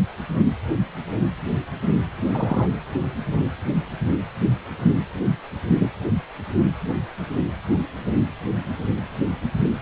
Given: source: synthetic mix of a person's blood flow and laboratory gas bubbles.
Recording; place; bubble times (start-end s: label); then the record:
Doppler ultrasound of blood flow; precordium
2.30-2.68 s: bubbles
5.80-5.92 s: bubbles
From the record:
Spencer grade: 2 (many but less than half of the cardiac periods contain bubble signals, singularly or in groups); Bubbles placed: only in the low amplitude regions of the cardiac cycle